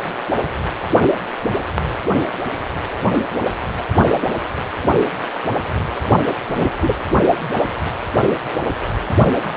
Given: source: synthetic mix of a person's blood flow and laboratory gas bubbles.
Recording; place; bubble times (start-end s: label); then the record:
Doppler ultrasound of blood flow; precordium
6.57-6.71 s: bubbles
6.82-6.93 s: bubbles
From the record:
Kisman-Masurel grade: 113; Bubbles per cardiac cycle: 1 to 2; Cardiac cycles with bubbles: 1 to 10%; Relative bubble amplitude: loud (0.450 to 0.775); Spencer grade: 1 (occasional bubble signal discernible with the cardiac motion signal, with majority of cardiac periods free of bubbles); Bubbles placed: only in the low amplitude regions of the cardiac cycle